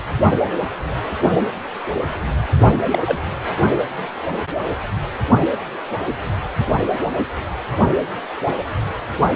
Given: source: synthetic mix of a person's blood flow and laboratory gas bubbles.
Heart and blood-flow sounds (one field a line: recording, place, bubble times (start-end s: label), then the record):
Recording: Doppler ultrasound of blood flow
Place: precordium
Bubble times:
2.92-2.99 s: bubbles
3.05-3.19 s: bubbles
From the record:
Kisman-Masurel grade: 112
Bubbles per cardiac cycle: 1 to 2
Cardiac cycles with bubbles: 1 to 10%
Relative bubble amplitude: moderate (0.250 to 0.450)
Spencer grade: 1 (occasional bubble signal discernible with the cardiac motion signal, with majority of cardiac periods free of bubbles)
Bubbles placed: only in the low amplitude regions of the cardiac cycle